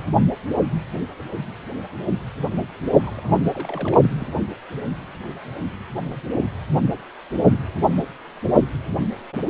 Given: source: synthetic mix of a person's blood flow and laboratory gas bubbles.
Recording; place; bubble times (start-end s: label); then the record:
Doppler ultrasound of blood flow; precordium
3.02-3.46 s: bubbles
3.50-4.10 s: bubbles
4.19-4.32 s: bubbles
From the record:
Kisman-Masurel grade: 211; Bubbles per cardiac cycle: several, 3 to 8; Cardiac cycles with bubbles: 1 to 10%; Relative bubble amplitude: barely perceptible (0.100 to 0.250); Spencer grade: 1 (occasional bubble signal discernible with the cardiac motion signal, with majority of cardiac periods free of bubbles); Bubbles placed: anywhere in the cardiac cycle